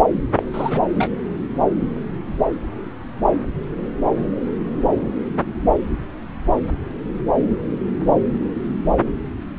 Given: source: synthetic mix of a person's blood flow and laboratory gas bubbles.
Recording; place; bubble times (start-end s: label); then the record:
Doppler ultrasound of blood flow; subclavian vein
0.36-0.42 s: bubbles
0.53-0.81 s: bubbles
0.95-1.10 s: bubbles
From the record:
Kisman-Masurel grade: 212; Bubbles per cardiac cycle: several, 3 to 8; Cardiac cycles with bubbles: 1 to 10%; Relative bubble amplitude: moderate (0.250 to 0.450); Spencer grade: 1 (occasional bubble signal discernible with the cardiac motion signal, with majority of cardiac periods free of bubbles); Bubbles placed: anywhere in the cardiac cycle